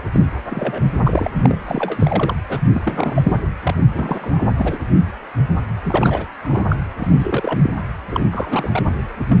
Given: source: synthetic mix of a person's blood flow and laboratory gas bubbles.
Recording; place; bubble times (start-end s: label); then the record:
Doppler ultrasound of blood flow; precordium
0.00-0.02 s: bubbles
0.13-0.24 s: bubbles
0.50-0.82 s: bubbles
1.03-1.30 s: bubbles
1.37-1.58 s: bubbles
1.65-2.36 s: bubbles
2.49-2.61 s: bubbles
2.74-3.37 s: bubbles
3.63-3.75 s: bubbles
3.93-4.43 s: bubbles
4.56-4.78 s: bubbles
5.83-6.27 s: bubbles
6.43-6.65 s: bubbles
6.69-6.76 s: bubbles
6.98-7.72 s: bubbles
8.11-8.28 s: bubbles
8.31-8.70 s: bubbles
8.72-8.83 s: bubbles
9.29-9.40 s: bubbles
From the record:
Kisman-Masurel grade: 332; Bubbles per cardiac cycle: rolling drumbeat, 9 or more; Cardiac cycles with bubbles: 50 to 99%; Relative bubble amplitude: moderate (0.250 to 0.450); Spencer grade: 3 (all of the cardiac periods contain showers or single bubble signals, but not dominating or overriding the cardiac motion signals); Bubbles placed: anywhere in the cardiac cycle